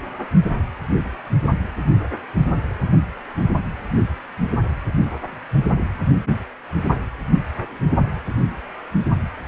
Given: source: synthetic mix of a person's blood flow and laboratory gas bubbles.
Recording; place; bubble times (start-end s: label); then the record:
Doppler ultrasound of blood flow; precordium
2.91-2.96 s: bubbles
From the record:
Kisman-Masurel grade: 111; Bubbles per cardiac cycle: 1 to 2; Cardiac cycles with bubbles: 1 to 10%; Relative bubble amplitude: barely perceptible (0.100 to 0.250); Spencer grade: 1 (occasional bubble signal discernible with the cardiac motion signal, with majority of cardiac periods free of bubbles); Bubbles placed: only in the low amplitude regions of the cardiac cycle